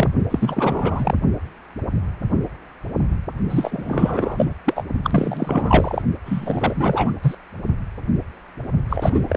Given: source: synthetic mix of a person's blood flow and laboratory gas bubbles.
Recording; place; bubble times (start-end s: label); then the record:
Doppler ultrasound of blood flow; precordium
0.00-0.10 s: bubbles
0.30-1.15 s: bubbles
3.50-4.54 s: bubbles
4.66-4.83 s: bubbles
5.03-6.02 s: bubbles
6.25-7.12 s: bubbles
7.22-7.35 s: bubbles
8.89-9.36 s: bubbles
From the record:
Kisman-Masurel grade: 333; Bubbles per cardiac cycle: rolling drumbeat, 9 or more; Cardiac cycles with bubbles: 50 to 99%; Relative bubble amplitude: loud (0.450 to 0.775); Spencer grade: 3 (all of the cardiac periods contain showers or single bubble signals, but not dominating or overriding the cardiac motion signals); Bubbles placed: only in the low amplitude regions of the cardiac cycle